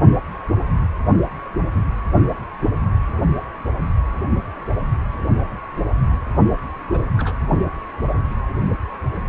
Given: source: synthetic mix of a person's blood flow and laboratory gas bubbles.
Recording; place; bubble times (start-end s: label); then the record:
Doppler ultrasound of blood flow; precordium
6.93-6.99 s: bubbles
7.17-7.33 s: bubbles
From the record:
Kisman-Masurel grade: 111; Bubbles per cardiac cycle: 1 to 2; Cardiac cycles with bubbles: 1 to 10%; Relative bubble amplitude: barely perceptible (0.100 to 0.250); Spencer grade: 1 (occasional bubble signal discernible with the cardiac motion signal, with majority of cardiac periods free of bubbles); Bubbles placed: anywhere in the cardiac cycle